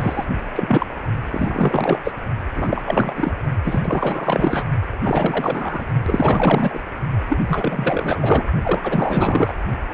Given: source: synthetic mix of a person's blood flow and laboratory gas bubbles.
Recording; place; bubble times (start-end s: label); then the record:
Doppler ultrasound of blood flow; precordium
0.00-0.25 s: bubbles
0.54-0.86 s: bubbles
1.30-1.98 s: bubbles
2.04-2.14 s: bubbles
2.56-2.81 s: bubbles
2.87-3.13 s: bubbles
3.16-3.33 s: bubbles
3.65-3.81 s: bubbles
3.83-4.66 s: bubbles
5.03-5.86 s: bubbles
6.07-6.82 s: bubbles
7.30-7.40 s: bubbles
7.48-8.46 s: bubbles
8.63-9.54 s: bubbles
From the record:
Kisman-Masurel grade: 444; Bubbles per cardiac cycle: continuous sound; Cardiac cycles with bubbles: 100%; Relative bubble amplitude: maximal (0.775 to 0.999); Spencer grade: 4 (maximum detectable bubble signal sounding continuously throughout systole and diastole of every cardiac period, and overriding the amplitude of the normal cardiac signals); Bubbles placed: only in the low amplitude regions of the cardiac cycle